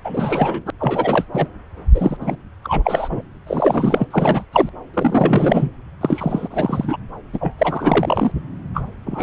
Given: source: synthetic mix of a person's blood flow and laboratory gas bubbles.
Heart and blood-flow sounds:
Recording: Doppler ultrasound of blood flow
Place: subclavian vein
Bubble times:
0.04-0.62 s: bubbles
0.66-0.71 s: bubbles
0.80-1.24 s: bubbles
1.33-1.48 s: bubbles
1.94-2.17 s: bubbles
2.20-2.35 s: bubbles
2.63-3.22 s: bubbles
3.46-4.07 s: bubbles
4.10-4.45 s: bubbles
4.52-4.70 s: bubbles
4.94-5.71 s: bubbles
6.01-6.48 s: bubbles
6.50-6.97 s: bubbles
7.33-7.55 s: bubbles
7.59-8.32 s: bubbles
8.74-8.84 s: bubbles
9.06-9.23 s: bubbles
From the record:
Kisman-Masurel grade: 343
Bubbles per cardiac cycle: rolling drumbeat, 9 or more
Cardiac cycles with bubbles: 100%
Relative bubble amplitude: loud (0.450 to 0.775)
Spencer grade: 3 (all of the cardiac periods contain showers or single bubble signals, but not dominating or overriding the cardiac motion signals)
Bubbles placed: anywhere in the cardiac cycle

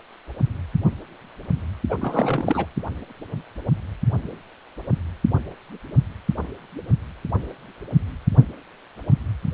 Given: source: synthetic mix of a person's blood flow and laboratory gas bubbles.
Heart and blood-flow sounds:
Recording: Doppler ultrasound of blood flow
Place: precordium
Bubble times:
1.89-1.98 s: bubbles
2.01-2.66 s: bubbles
From the record:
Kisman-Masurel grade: 222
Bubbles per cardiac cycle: several, 3 to 8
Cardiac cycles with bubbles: 10 to 50%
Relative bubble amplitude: moderate (0.250 to 0.450)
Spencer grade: 2 (many but less than half of the cardiac periods contain bubble signals, singularly or in groups)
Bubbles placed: only in the low amplitude regions of the cardiac cycle

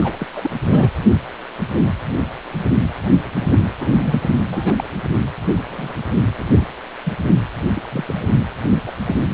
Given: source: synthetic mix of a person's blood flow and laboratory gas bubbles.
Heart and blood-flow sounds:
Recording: Doppler ultrasound of blood flow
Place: precordium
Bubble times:
0.02-0.26 s: bubbles
0.36-0.51 s: bubbles
0.69-0.90 s: bubbles
3.34-3.60 s: bubbles
3.79-4.19 s: bubbles
4.48-4.83 s: bubbles
5.69-5.93 s: bubbles
6.37-6.67 s: bubbles
7.04-7.13 s: bubbles
7.75-7.83 s: bubbles
7.92-8.22 s: bubbles
8.87-8.92 s: bubbles
9.05-9.16 s: bubbles
From the record:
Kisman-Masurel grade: 232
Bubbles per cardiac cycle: several, 3 to 8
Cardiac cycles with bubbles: 50 to 99%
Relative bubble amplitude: moderate (0.250 to 0.450)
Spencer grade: 3 (all of the cardiac periods contain showers or single bubble signals, but not dominating or overriding the cardiac motion signals)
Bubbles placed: only in the low amplitude regions of the cardiac cycle

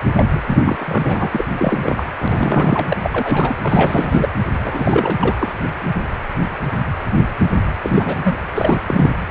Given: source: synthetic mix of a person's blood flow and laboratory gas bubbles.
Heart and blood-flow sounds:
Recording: Doppler ultrasound of blood flow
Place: precordium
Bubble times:
0.15-0.24 s: bubbles
0.33-0.40 s: bubbles
0.47-1.45 s: bubbles
1.57-2.03 s: bubbles
2.20-2.97 s: bubbles
3.02-3.54 s: bubbles
3.62-4.29 s: bubbles
4.63-5.35 s: bubbles
5.40-5.52 s: bubbles
7.82-8.15 s: bubbles
8.23-8.38 s: bubbles
8.54-8.79 s: bubbles
8.87-9.12 s: bubbles
9.28-9.31 s: bubbles
From the record:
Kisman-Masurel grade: 332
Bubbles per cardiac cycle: rolling drumbeat, 9 or more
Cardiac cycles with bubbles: 50 to 99%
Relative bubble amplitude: moderate (0.250 to 0.450)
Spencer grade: 3 (all of the cardiac periods contain showers or single bubble signals, but not dominating or overriding the cardiac motion signals)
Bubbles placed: anywhere in the cardiac cycle

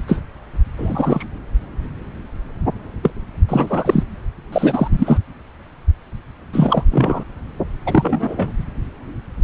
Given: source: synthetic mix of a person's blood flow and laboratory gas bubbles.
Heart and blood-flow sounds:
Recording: Doppler ultrasound of blood flow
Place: subclavian vein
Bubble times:
0.08-0.18 s: bubbles
0.78-1.25 s: bubbles
3.02-3.11 s: bubbles
3.48-4.03 s: bubbles
4.52-4.88 s: bubbles
4.91-5.18 s: bubbles
6.53-6.84 s: bubbles
6.91-7.24 s: bubbles
7.86-8.53 s: bubbles
From the record:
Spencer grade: 3 (all of the cardiac periods contain showers or single bubble signals, but not dominating or overriding the cardiac motion signals)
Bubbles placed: anywhere in the cardiac cycle

